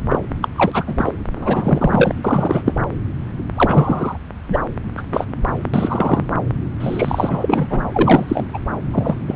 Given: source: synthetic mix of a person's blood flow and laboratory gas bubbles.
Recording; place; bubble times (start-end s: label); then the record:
Doppler ultrasound of blood flow; subclavian vein
0.10-0.19 s: bubbles
0.41-0.49 s: bubbles
0.56-1.14 s: bubbles
1.35-2.15 s: bubbles
2.24-2.62 s: bubbles
2.65-2.73 s: bubbles
3.56-4.18 s: bubbles
4.49-4.58 s: bubbles
4.97-5.03 s: bubbles
5.12-5.26 s: bubbles
5.74-6.27 s: bubbles
6.80-7.66 s: bubbles
7.70-7.80 s: bubbles
7.92-8.46 s: bubbles
8.54-8.58 s: bubbles
8.91-9.15 s: bubbles
9.26-9.36 s: bubbles
From the record:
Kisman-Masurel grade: 243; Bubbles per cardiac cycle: several, 3 to 8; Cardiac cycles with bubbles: 100%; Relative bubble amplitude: loud (0.450 to 0.775); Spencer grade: 3 (all of the cardiac periods contain showers or single bubble signals, but not dominating or overriding the cardiac motion signals); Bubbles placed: anywhere in the cardiac cycle